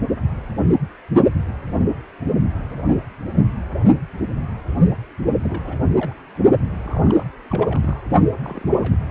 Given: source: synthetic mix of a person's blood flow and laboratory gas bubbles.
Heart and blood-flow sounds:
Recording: Doppler ultrasound of blood flow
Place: precordium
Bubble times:
5.43-5.80 s: bubbles
5.90-5.93 s: bubbles
5.97-6.15 s: bubbles
6.35-6.38 s: bubbles
6.79-7.29 s: bubbles
7.50-8.00 s: bubbles
8.42-8.97 s: bubbles
From the record:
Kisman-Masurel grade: 221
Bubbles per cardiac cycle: several, 3 to 8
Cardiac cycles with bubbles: 10 to 50%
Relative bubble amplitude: barely perceptible (0.100 to 0.250)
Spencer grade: 2 (many but less than half of the cardiac periods contain bubble signals, singularly or in groups)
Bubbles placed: only in the low amplitude regions of the cardiac cycle

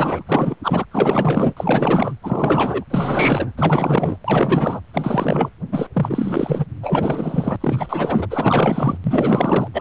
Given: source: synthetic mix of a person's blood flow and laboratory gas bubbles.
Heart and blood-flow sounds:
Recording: Doppler ultrasound of blood flow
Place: precordium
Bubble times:
0.00-0.23 s: bubbles
0.27-0.56 s: bubbles
0.62-0.85 s: bubbles
0.91-1.54 s: bubbles
1.57-2.15 s: bubbles
2.22-2.84 s: bubbles
2.90-3.52 s: bubbles
3.57-4.16 s: bubbles
4.24-4.80 s: bubbles
4.94-5.49 s: bubbles
5.71-5.87 s: bubbles
5.94-6.66 s: bubbles
6.81-7.56 s: bubbles
7.60-8.27 s: bubbles
8.30-8.97 s: bubbles
9.04-9.68 s: bubbles
9.73-9.81 s: bubbles
From the record:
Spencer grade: 4 (maximum detectable bubble signal sounding continuously throughout systole and diastole of every cardiac period, and overriding the amplitude of the normal cardiac signals)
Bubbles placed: anywhere in the cardiac cycle

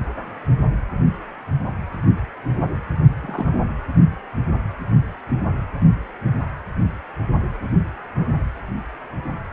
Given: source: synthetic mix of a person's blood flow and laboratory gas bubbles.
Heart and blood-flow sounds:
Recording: Doppler ultrasound of blood flow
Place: precordium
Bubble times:
3.22-3.60 s: bubbles
From the record:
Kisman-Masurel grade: 112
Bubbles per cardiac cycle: 1 to 2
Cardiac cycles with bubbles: 1 to 10%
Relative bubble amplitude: moderate (0.250 to 0.450)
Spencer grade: 1 (occasional bubble signal discernible with the cardiac motion signal, with majority of cardiac periods free of bubbles)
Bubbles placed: anywhere in the cardiac cycle

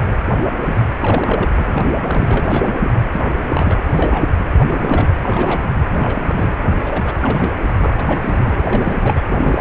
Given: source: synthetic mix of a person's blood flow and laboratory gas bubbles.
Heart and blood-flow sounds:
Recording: Doppler ultrasound of blood flow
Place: precordium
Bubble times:
0.00-0.18 s: bubbles
0.60-0.82 s: bubbles
1.00-1.48 s: bubbles
1.58-1.85 s: bubbles
2.03-2.77 s: bubbles
2.80-2.90 s: bubbles
3.11-3.35 s: bubbles
3.45-3.85 s: bubbles
3.96-4.28 s: bubbles
4.38-4.44 s: bubbles
4.64-5.08 s: bubbles
5.21-5.66 s: bubbles
5.97-6.49 s: bubbles
6.83-7.16 s: bubbles
7.21-7.54 s: bubbles
7.81-8.60 s: bubbles
8.65-8.97 s: bubbles
9.03-9.22 s: bubbles
9.33-9.61 s: bubbles
From the record:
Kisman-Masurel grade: 342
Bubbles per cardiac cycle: rolling drumbeat, 9 or more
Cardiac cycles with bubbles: 100%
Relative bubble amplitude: moderate (0.250 to 0.450)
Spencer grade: 3 (all of the cardiac periods contain showers or single bubble signals, but not dominating or overriding the cardiac motion signals)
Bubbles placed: anywhere in the cardiac cycle

